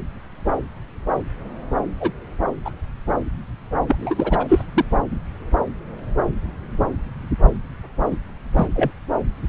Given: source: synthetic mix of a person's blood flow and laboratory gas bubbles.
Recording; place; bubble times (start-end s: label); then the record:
Doppler ultrasound of blood flow; subclavian vein
2.00-2.12 s: bubbles
2.65-2.71 s: bubbles
3.88-4.45 s: bubbles
4.49-4.63 s: bubbles
4.74-4.84 s: bubbles
8.11-8.16 s: bubbles
8.57-8.67 s: bubbles
8.75-8.90 s: bubbles
From the record:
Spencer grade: 2 (many but less than half of the cardiac periods contain bubble signals, singularly or in groups); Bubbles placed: anywhere in the cardiac cycle